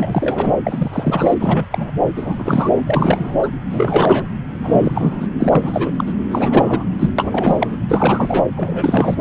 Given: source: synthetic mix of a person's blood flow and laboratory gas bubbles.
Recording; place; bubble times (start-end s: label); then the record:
Doppler ultrasound of blood flow; subclavian vein
0.00-0.53 s: bubbles
0.66-1.34 s: bubbles
1.40-1.64 s: bubbles
1.70-1.91 s: bubbles
2.16-2.81 s: bubbles
2.85-3.35 s: bubbles
3.39-3.49 s: bubbles
3.70-4.25 s: bubbles
4.63-5.28 s: bubbles
5.38-5.92 s: bubbles
5.98-6.13 s: bubbles
6.31-6.86 s: bubbles
6.99-7.10 s: bubbles
7.18-7.76 s: bubbles
7.88-8.46 s: bubbles
8.56-9.16 s: bubbles
From the record:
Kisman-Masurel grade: 343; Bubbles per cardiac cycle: rolling drumbeat, 9 or more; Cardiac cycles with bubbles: 100%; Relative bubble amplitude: loud (0.450 to 0.775); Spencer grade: 3 (all of the cardiac periods contain showers or single bubble signals, but not dominating or overriding the cardiac motion signals); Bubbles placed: anywhere in the cardiac cycle